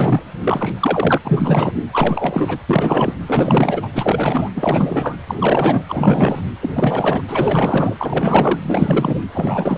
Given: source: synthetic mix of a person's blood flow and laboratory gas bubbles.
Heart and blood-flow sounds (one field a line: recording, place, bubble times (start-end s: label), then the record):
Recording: Doppler ultrasound of blood flow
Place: precordium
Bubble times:
0.00-0.23 s: bubbles
0.43-0.72 s: bubbles
0.80-1.18 s: bubbles
1.24-1.73 s: bubbles
1.93-2.58 s: bubbles
2.69-3.14 s: bubbles
3.27-3.88 s: bubbles
3.92-4.49 s: bubbles
4.54-5.17 s: bubbles
5.27-5.83 s: bubbles
5.88-6.41 s: bubbles
6.61-6.70 s: bubbles
6.74-7.22 s: bubbles
7.28-8.60 s: bubbles
8.62-9.20 s: bubbles
9.34-9.78 s: bubbles
From the record:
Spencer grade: 4 (maximum detectable bubble signal sounding continuously throughout systole and diastole of every cardiac period, and overriding the amplitude of the normal cardiac signals)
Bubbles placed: anywhere in the cardiac cycle